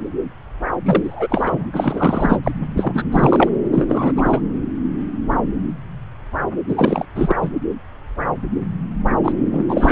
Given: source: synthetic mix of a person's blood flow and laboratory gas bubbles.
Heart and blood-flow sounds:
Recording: Doppler ultrasound of blood flow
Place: subclavian vein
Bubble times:
0.85-1.27 s: bubbles
1.30-1.66 s: bubbles
1.73-2.38 s: bubbles
2.42-2.52 s: bubbles
2.77-3.02 s: bubbles
3.12-3.50 s: bubbles
3.71-4.13 s: bubbles
4.16-4.41 s: bubbles
6.68-7.06 s: bubbles
7.16-7.36 s: bubbles
7.41-7.50 s: bubbles
9.23-9.32 s: bubbles
9.52-9.66 s: bubbles
9.69-9.92 s: bubbles
From the record:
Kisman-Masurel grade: 333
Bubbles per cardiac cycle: rolling drumbeat, 9 or more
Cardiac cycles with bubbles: 50 to 99%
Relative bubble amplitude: loud (0.450 to 0.775)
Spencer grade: 3 (all of the cardiac periods contain showers or single bubble signals, but not dominating or overriding the cardiac motion signals)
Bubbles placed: anywhere in the cardiac cycle

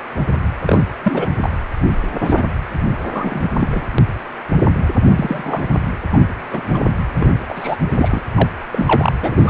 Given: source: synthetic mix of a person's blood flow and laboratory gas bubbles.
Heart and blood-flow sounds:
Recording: Doppler ultrasound of blood flow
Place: precordium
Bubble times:
0.66-0.84 s: bubbles
1.04-1.30 s: bubbles
1.43-1.50 s: bubbles
2.21-2.43 s: bubbles
3.14-3.48 s: bubbles
3.60-3.81 s: bubbles
5.17-5.68 s: bubbles
6.12-6.19 s: bubbles
6.51-6.83 s: bubbles
7.16-7.29 s: bubbles
7.48-7.76 s: bubbles
7.92-8.21 s: bubbles
8.35-8.48 s: bubbles
8.71-9.12 s: bubbles
9.21-9.50 s: bubbles
From the record:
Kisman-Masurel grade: 232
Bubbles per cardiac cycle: several, 3 to 8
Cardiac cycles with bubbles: 50 to 99%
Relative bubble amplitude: moderate (0.250 to 0.450)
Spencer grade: 3 (all of the cardiac periods contain showers or single bubble signals, but not dominating or overriding the cardiac motion signals)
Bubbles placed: anywhere in the cardiac cycle

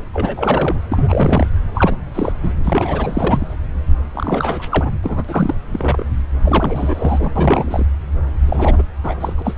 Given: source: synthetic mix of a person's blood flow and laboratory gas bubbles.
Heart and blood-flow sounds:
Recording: Doppler ultrasound of blood flow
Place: subclavian vein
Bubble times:
0.13-0.76 s: bubbles
0.90-1.47 s: bubbles
1.74-1.97 s: bubbles
2.14-2.33 s: bubbles
2.42-2.53 s: bubbles
2.63-3.54 s: bubbles
4.14-4.91 s: bubbles
5.03-5.55 s: bubbles
5.71-6.04 s: bubbles
6.41-7.31 s: bubbles
7.35-7.87 s: bubbles
8.48-8.82 s: bubbles
9.03-9.16 s: bubbles
9.20-9.33 s: bubbles
9.38-9.58 s: bubbles
From the record:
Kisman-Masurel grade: 332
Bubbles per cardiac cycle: rolling drumbeat, 9 or more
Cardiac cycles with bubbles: 50 to 99%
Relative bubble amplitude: moderate (0.250 to 0.450)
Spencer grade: 3 (all of the cardiac periods contain showers or single bubble signals, but not dominating or overriding the cardiac motion signals)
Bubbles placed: anywhere in the cardiac cycle

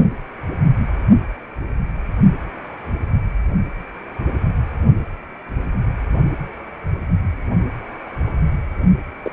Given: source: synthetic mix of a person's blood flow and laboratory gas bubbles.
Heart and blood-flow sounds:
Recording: Doppler ultrasound of blood flow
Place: precordium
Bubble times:
9.24-9.33 s: bubbles
From the record:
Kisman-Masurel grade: 112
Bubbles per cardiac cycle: 1 to 2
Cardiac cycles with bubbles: 1 to 10%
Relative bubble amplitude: moderate (0.250 to 0.450)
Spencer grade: 1 (occasional bubble signal discernible with the cardiac motion signal, with majority of cardiac periods free of bubbles)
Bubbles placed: only in the low amplitude regions of the cardiac cycle

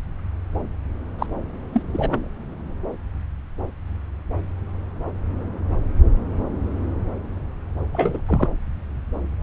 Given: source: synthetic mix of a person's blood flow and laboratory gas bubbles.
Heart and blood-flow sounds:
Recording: Doppler ultrasound of blood flow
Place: subclavian vein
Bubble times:
1.19-1.26 s: bubbles
1.73-1.82 s: bubbles
1.92-2.29 s: bubbles
7.92-8.22 s: bubbles
8.27-8.48 s: bubbles
From the record:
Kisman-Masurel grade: 222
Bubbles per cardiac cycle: several, 3 to 8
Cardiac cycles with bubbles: 10 to 50%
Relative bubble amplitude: moderate (0.250 to 0.450)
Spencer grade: 2 (many but less than half of the cardiac periods contain bubble signals, singularly or in groups)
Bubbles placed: anywhere in the cardiac cycle

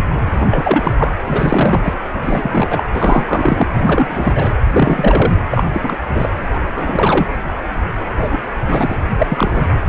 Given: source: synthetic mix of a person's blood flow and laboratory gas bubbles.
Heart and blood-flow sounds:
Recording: Doppler ultrasound of blood flow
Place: precordium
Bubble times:
0.13-0.47 s: bubbles
0.51-0.94 s: bubbles
0.98-1.12 s: bubbles
1.26-1.94 s: bubbles
2.15-2.83 s: bubbles
2.94-3.67 s: bubbles
3.75-4.07 s: bubbles
4.10-4.51 s: bubbles
4.73-5.33 s: bubbles
5.50-5.64 s: bubbles
5.73-5.98 s: bubbles
6.10-6.32 s: bubbles
6.52-6.60 s: bubbles
6.75-7.28 s: bubbles
8.16-8.38 s: bubbles
8.67-8.96 s: bubbles
9.20-9.62 s: bubbles
9.87-9.89 s: bubbles
From the record:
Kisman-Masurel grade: 343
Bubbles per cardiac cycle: rolling drumbeat, 9 or more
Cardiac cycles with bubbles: 100%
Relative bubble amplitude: loud (0.450 to 0.775)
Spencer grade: 3 (all of the cardiac periods contain showers or single bubble signals, but not dominating or overriding the cardiac motion signals)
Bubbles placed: anywhere in the cardiac cycle

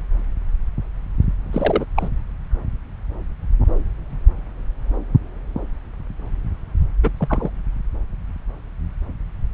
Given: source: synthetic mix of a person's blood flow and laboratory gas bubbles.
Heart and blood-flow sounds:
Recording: Doppler ultrasound of blood flow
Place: subclavian vein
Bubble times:
1.52-1.85 s: bubbles
1.95-2.10 s: bubbles
7.03-7.10 s: bubbles
7.18-7.50 s: bubbles
From the record:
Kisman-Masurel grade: 222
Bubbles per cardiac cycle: several, 3 to 8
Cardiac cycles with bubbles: 10 to 50%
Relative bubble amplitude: moderate (0.250 to 0.450)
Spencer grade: 2 (many but less than half of the cardiac periods contain bubble signals, singularly or in groups)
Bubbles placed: anywhere in the cardiac cycle

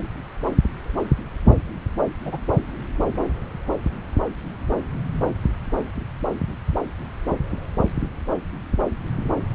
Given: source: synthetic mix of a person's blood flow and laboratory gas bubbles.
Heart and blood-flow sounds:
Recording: Doppler ultrasound of blood flow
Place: subclavian vein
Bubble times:
2.25-2.38 s: bubbles
From the record:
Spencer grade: 1 (occasional bubble signal discernible with the cardiac motion signal, with majority of cardiac periods free of bubbles)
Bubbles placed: anywhere in the cardiac cycle

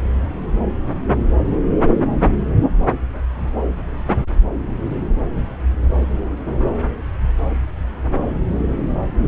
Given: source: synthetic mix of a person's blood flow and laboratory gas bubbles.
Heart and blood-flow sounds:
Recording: Doppler ultrasound of blood flow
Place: subclavian vein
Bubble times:
no bubbles
From the record:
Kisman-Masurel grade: 000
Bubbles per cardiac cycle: 0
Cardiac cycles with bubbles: 0%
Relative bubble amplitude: no bubbles discernible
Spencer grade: 0 (complete lack of bubble signals)

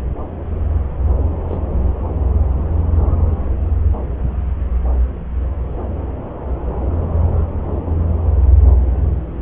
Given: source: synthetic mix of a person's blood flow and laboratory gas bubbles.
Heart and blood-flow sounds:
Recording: Doppler ultrasound of blood flow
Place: subclavian vein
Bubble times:
1.49-1.58 s: bubbles
From the record:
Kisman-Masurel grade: 111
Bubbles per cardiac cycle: 1 to 2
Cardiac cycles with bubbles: 1 to 10%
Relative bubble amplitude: barely perceptible (0.100 to 0.250)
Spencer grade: 1 (occasional bubble signal discernible with the cardiac motion signal, with majority of cardiac periods free of bubbles)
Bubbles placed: anywhere in the cardiac cycle

